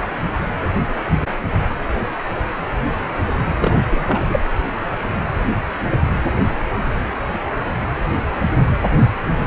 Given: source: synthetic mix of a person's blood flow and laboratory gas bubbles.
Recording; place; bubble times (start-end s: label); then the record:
Doppler ultrasound of blood flow; precordium
3.60-3.83 s: bubbles
3.89-4.39 s: bubbles
From the record:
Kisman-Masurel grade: 213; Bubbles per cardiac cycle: several, 3 to 8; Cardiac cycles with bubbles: 1 to 10%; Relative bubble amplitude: loud (0.450 to 0.775); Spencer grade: 1 (occasional bubble signal discernible with the cardiac motion signal, with majority of cardiac periods free of bubbles); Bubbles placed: anywhere in the cardiac cycle